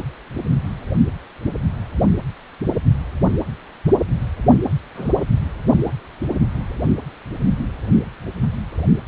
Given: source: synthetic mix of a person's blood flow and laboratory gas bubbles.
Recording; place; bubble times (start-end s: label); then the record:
Doppler ultrasound of blood flow; precordium
4.95-5.25 s: bubbles
From the record:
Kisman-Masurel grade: 122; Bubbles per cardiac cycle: 1 to 2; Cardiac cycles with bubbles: 10 to 50%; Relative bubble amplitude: moderate (0.250 to 0.450); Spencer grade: 2 (many but less than half of the cardiac periods contain bubble signals, singularly or in groups); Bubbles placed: anywhere in the cardiac cycle